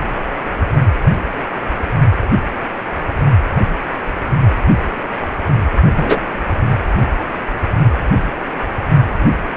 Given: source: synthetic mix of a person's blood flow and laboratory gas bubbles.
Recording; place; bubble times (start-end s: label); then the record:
Doppler ultrasound of blood flow; precordium
5.96-6.21 s: bubbles
From the record:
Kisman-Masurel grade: 113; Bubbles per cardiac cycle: 1 to 2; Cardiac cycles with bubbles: 1 to 10%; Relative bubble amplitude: loud (0.450 to 0.775); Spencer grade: 1 (occasional bubble signal discernible with the cardiac motion signal, with majority of cardiac periods free of bubbles); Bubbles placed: only in the low amplitude regions of the cardiac cycle